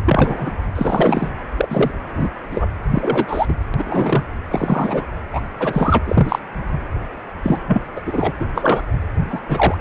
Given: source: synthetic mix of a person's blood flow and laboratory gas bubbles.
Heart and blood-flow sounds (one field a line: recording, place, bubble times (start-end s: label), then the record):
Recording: Doppler ultrasound of blood flow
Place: precordium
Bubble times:
0.06-0.52 s: bubbles
0.74-1.30 s: bubbles
1.56-1.92 s: bubbles
2.14-2.29 s: bubbles
2.51-2.72 s: bubbles
2.91-3.53 s: bubbles
3.74-4.24 s: bubbles
4.50-5.05 s: bubbles
5.33-5.42 s: bubbles
5.59-5.99 s: bubbles
6.07-6.39 s: bubbles
7.43-7.61 s: bubbles
7.67-7.82 s: bubbles
7.96-8.01 s: bubbles
8.06-8.33 s: bubbles
8.40-8.46 s: bubbles
8.54-8.81 s: bubbles
9.29-9.40 s: bubbles
9.49-9.75 s: bubbles
From the record:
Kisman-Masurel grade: 243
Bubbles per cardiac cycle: several, 3 to 8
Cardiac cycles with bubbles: 100%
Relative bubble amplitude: loud (0.450 to 0.775)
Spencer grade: 3 (all of the cardiac periods contain showers or single bubble signals, but not dominating or overriding the cardiac motion signals)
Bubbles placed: anywhere in the cardiac cycle